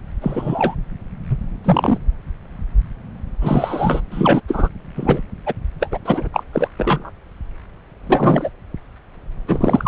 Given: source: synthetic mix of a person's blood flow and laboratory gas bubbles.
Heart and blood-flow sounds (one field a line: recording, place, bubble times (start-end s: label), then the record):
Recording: Doppler ultrasound of blood flow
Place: subclavian vein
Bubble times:
0.21-0.75 s: bubbles
1.29-1.37 s: bubbles
1.64-1.98 s: bubbles
3.41-4.01 s: bubbles
4.10-4.41 s: bubbles
4.47-4.68 s: bubbles
4.95-5.21 s: bubbles
5.46-5.54 s: bubbles
5.80-5.88 s: bubbles
5.91-5.99 s: bubbles
6.05-6.28 s: bubbles
6.33-6.43 s: bubbles
6.53-6.68 s: bubbles
6.78-7.10 s: bubbles
8.04-8.49 s: bubbles
9.47-9.88 s: bubbles
From the record:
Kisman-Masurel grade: 233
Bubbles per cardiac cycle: several, 3 to 8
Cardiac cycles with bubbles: 50 to 99%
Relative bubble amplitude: loud (0.450 to 0.775)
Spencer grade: 3 (all of the cardiac periods contain showers or single bubble signals, but not dominating or overriding the cardiac motion signals)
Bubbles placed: anywhere in the cardiac cycle